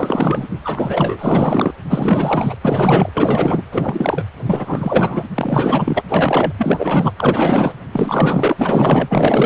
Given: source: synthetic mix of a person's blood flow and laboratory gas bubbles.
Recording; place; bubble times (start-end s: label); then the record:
Doppler ultrasound of blood flow; precordium
0.00-0.47 s: bubbles
0.62-1.72 s: bubbles
1.89-2.54 s: bubbles
2.61-3.10 s: bubbles
3.13-3.62 s: bubbles
3.71-4.25 s: bubbles
4.46-5.24 s: bubbles
5.34-6.01 s: bubbles
6.08-6.52 s: bubbles
6.58-7.11 s: bubbles
7.17-7.73 s: bubbles
7.92-8.54 s: bubbles
8.58-9.46 s: bubbles
From the record:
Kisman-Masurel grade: 444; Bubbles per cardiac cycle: continuous sound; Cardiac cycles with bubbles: 100%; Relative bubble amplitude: maximal (0.775 to 0.999); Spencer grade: 4 (maximum detectable bubble signal sounding continuously throughout systole and diastole of every cardiac period, and overriding the amplitude of the normal cardiac signals); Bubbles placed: anywhere in the cardiac cycle